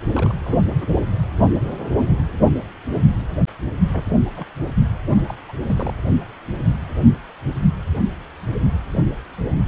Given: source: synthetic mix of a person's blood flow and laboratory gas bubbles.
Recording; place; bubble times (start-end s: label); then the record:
Doppler ultrasound of blood flow; precordium
0.13-0.33 s: bubbles
0.40-0.86 s: bubbles
3.93-4.17 s: bubbles
4.36-4.46 s: bubbles
5.04-5.08 s: bubbles
5.15-5.36 s: bubbles
5.48-5.53 s: bubbles
5.66-5.94 s: bubbles
From the record:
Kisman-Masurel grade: 221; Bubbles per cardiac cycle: several, 3 to 8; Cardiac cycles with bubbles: 10 to 50%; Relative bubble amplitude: barely perceptible (0.100 to 0.250); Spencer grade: 2 (many but less than half of the cardiac periods contain bubble signals, singularly or in groups); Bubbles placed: only in the low amplitude regions of the cardiac cycle